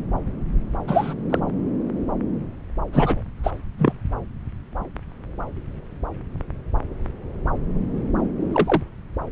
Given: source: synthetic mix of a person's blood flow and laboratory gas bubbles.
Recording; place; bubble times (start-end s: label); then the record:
Doppler ultrasound of blood flow; subclavian vein
0.88-1.14 s: bubbles
1.30-1.40 s: bubbles
2.92-3.21 s: bubbles
3.44-3.50 s: bubbles
3.78-3.92 s: bubbles
8.53-8.82 s: bubbles
From the record:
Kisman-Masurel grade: 122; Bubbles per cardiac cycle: 1 to 2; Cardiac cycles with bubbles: 10 to 50%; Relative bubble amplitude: moderate (0.250 to 0.450); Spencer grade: 2 (many but less than half of the cardiac periods contain bubble signals, singularly or in groups); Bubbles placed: anywhere in the cardiac cycle